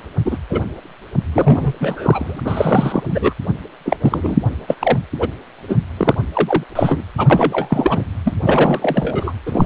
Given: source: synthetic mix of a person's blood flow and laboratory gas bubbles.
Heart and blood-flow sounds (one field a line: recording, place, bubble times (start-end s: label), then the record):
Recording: Doppler ultrasound of blood flow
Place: precordium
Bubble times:
0.25-0.38 s: bubbles
0.50-0.61 s: bubbles
1.32-1.72 s: bubbles
1.80-2.40 s: bubbles
2.44-3.34 s: bubbles
3.85-3.96 s: bubbles
4.00-4.38 s: bubbles
4.67-4.75 s: bubbles
4.79-4.99 s: bubbles
5.19-5.28 s: bubbles
5.68-5.76 s: bubbles
5.97-6.14 s: bubbles
6.33-6.63 s: bubbles
6.75-7.04 s: bubbles
7.17-8.05 s: bubbles
8.24-8.35 s: bubbles
8.45-9.33 s: bubbles
9.46-9.66 s: bubbles
From the record:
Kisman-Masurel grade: 343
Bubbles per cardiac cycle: rolling drumbeat, 9 or more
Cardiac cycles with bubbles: 100%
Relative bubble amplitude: loud (0.450 to 0.775)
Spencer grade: 3 (all of the cardiac periods contain showers or single bubble signals, but not dominating or overriding the cardiac motion signals)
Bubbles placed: anywhere in the cardiac cycle